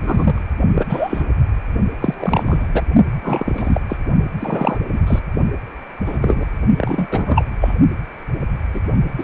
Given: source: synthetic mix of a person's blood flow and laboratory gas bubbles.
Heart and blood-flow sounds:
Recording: Doppler ultrasound of blood flow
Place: precordium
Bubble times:
0.00-0.42 s: bubbles
0.74-0.86 s: bubbles
0.88-1.24 s: bubbles
2.00-2.71 s: bubbles
2.73-2.82 s: bubbles
3.22-3.81 s: bubbles
3.88-3.97 s: bubbles
4.39-4.78 s: bubbles
4.92-5.02 s: bubbles
5.07-5.20 s: bubbles
6.06-6.18 s: bubbles
6.22-6.45 s: bubbles
6.77-7.08 s: bubbles
7.11-7.46 s: bubbles
7.61-7.75 s: bubbles
8.73-8.80 s: bubbles
9.18-9.24 s: bubbles
From the record:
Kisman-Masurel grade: 233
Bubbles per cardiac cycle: several, 3 to 8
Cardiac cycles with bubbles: 50 to 99%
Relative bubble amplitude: loud (0.450 to 0.775)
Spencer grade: 3 (all of the cardiac periods contain showers or single bubble signals, but not dominating or overriding the cardiac motion signals)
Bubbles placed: only in the low amplitude regions of the cardiac cycle

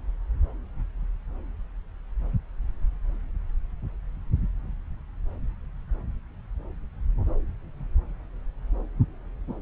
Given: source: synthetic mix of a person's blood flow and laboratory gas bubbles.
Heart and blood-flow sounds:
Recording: Doppler ultrasound of blood flow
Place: subclavian vein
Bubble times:
no bubbles
From the record:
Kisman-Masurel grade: 000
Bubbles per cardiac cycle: 0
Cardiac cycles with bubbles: 0%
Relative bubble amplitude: no bubbles discernible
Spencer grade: 0 (complete lack of bubble signals)

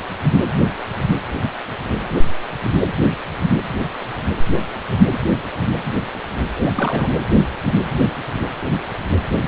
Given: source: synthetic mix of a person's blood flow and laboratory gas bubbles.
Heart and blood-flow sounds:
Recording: Doppler ultrasound of blood flow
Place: precordium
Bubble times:
6.55-7.07 s: bubbles
From the record:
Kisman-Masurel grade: 212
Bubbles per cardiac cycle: several, 3 to 8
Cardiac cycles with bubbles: 1 to 10%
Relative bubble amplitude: moderate (0.250 to 0.450)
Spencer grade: 1 (occasional bubble signal discernible with the cardiac motion signal, with majority of cardiac periods free of bubbles)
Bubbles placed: anywhere in the cardiac cycle

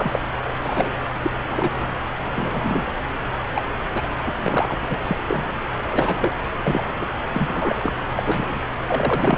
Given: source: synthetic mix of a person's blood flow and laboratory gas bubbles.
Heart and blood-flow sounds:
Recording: Doppler ultrasound of blood flow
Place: subclavian vein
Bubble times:
0.00-0.19 s: bubbles
0.60-0.90 s: bubbles
1.22-1.31 s: bubbles
1.50-1.87 s: bubbles
2.35-2.93 s: bubbles
3.55-3.61 s: bubbles
3.94-4.08 s: bubbles
4.26-4.31 s: bubbles
4.38-4.77 s: bubbles
4.89-4.97 s: bubbles
5.01-5.18 s: bubbles
5.27-5.50 s: bubbles
5.90-6.33 s: bubbles
6.63-6.85 s: bubbles
7.01-7.06 s: bubbles
7.32-7.93 s: bubbles
8.15-8.23 s: bubbles
8.25-8.61 s: bubbles
8.87-9.38 s: bubbles
From the record:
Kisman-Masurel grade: 242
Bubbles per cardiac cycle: several, 3 to 8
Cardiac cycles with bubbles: 100%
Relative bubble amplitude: moderate (0.250 to 0.450)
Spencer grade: 3 (all of the cardiac periods contain showers or single bubble signals, but not dominating or overriding the cardiac motion signals)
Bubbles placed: anywhere in the cardiac cycle

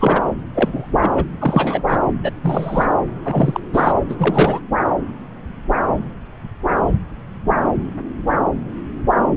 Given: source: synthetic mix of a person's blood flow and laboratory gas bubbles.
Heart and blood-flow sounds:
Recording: Doppler ultrasound of blood flow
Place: subclavian vein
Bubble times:
0.00-0.23 s: bubbles
0.55-1.11 s: bubbles
1.15-1.24 s: bubbles
1.39-1.83 s: bubbles
1.88-1.98 s: bubbles
2.23-2.31 s: bubbles
2.42-2.85 s: bubbles
3.24-3.60 s: bubbles
3.73-3.93 s: bubbles
4.09-4.15 s: bubbles
4.17-4.60 s: bubbles
From the record:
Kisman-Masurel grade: 233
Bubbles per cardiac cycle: several, 3 to 8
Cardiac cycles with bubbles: 50 to 99%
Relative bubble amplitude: loud (0.450 to 0.775)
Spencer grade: 3 (all of the cardiac periods contain showers or single bubble signals, but not dominating or overriding the cardiac motion signals)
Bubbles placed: anywhere in the cardiac cycle

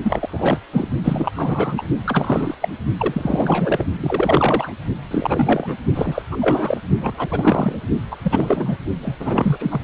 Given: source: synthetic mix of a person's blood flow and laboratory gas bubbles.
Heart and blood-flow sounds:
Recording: Doppler ultrasound of blood flow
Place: precordium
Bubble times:
0.02-0.59 s: bubbles
0.72-0.88 s: bubbles
1.03-1.31 s: bubbles
1.35-1.83 s: bubbles
2.06-2.54 s: bubbles
2.61-2.69 s: bubbles
2.98-3.85 s: bubbles
4.00-4.73 s: bubbles
5.11-5.76 s: bubbles
5.95-6.22 s: bubbles
6.32-6.38 s: bubbles
6.41-6.80 s: bubbles
7.00-7.79 s: bubbles
8.11-8.16 s: bubbles
8.23-8.77 s: bubbles
9.02-9.81 s: bubbles
From the record:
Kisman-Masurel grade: 333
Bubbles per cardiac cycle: rolling drumbeat, 9 or more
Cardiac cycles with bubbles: 50 to 99%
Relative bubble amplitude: loud (0.450 to 0.775)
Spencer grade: 3 (all of the cardiac periods contain showers or single bubble signals, but not dominating or overriding the cardiac motion signals)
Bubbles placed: only in the low amplitude regions of the cardiac cycle

